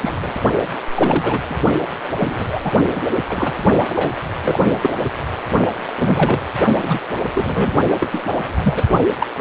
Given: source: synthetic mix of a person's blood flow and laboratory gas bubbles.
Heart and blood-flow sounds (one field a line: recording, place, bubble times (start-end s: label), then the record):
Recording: Doppler ultrasound of blood flow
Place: precordium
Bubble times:
0.00-0.33 s: bubbles
0.94-1.57 s: bubbles
2.19-2.73 s: bubbles
2.94-3.02 s: bubbles
3.29-3.53 s: bubbles
3.89-4.10 s: bubbles
4.41-4.60 s: bubbles
4.82-4.95 s: bubbles
5.04-5.09 s: bubbles
5.97-6.40 s: bubbles
6.81-6.99 s: bubbles
7.35-7.72 s: bubbles
8.00-8.08 s: bubbles
8.12-8.23 s: bubbles
8.57-8.83 s: bubbles
9.18-9.26 s: bubbles
From the record:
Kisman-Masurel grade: 242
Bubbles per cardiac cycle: several, 3 to 8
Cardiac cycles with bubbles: 100%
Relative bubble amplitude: moderate (0.250 to 0.450)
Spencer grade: 3 (all of the cardiac periods contain showers or single bubble signals, but not dominating or overriding the cardiac motion signals)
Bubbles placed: only in the low amplitude regions of the cardiac cycle